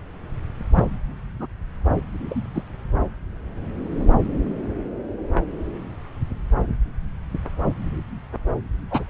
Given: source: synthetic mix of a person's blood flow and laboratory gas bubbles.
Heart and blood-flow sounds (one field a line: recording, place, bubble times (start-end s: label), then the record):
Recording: Doppler ultrasound of blood flow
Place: subclavian vein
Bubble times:
0.74-0.84 s: bubbles
1.39-1.47 s: bubbles
2.29-2.44 s: bubbles
2.54-2.63 s: bubbles
8.89-9.04 s: bubbles
From the record:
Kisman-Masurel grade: 122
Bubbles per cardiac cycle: 1 to 2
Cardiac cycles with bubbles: 10 to 50%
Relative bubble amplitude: moderate (0.250 to 0.450)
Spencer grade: 2 (many but less than half of the cardiac periods contain bubble signals, singularly or in groups)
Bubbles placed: anywhere in the cardiac cycle